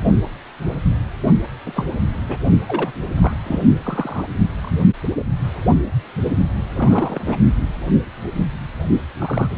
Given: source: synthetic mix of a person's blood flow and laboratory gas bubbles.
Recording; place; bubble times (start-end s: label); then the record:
Doppler ultrasound of blood flow; precordium
1.66-1.88 s: bubbles
2.28-2.37 s: bubbles
2.67-2.92 s: bubbles
3.22-3.37 s: bubbles
3.44-3.67 s: bubbles
3.83-4.28 s: bubbles
4.61-4.83 s: bubbles
6.75-7.38 s: bubbles
9.20-9.55 s: bubbles
From the record:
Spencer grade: 3 (all of the cardiac periods contain showers or single bubble signals, but not dominating or overriding the cardiac motion signals); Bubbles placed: only in the low amplitude regions of the cardiac cycle